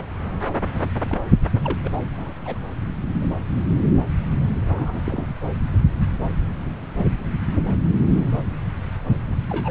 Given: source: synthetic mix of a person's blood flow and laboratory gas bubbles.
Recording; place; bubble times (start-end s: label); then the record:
Doppler ultrasound of blood flow; subclavian vein
0.00-0.04 s: bubbles
1.10-1.21 s: bubbles
1.64-1.78 s: bubbles
1.83-1.89 s: bubbles
2.17-2.33 s: bubbles
2.45-2.58 s: bubbles
3.12-3.29 s: bubbles
4.67-5.00 s: bubbles
5.05-5.27 s: bubbles
9.49-9.71 s: bubbles
From the record:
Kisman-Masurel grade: 122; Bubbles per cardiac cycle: 1 to 2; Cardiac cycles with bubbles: 10 to 50%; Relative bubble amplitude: moderate (0.250 to 0.450); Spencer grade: 2 (many but less than half of the cardiac periods contain bubble signals, singularly or in groups); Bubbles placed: anywhere in the cardiac cycle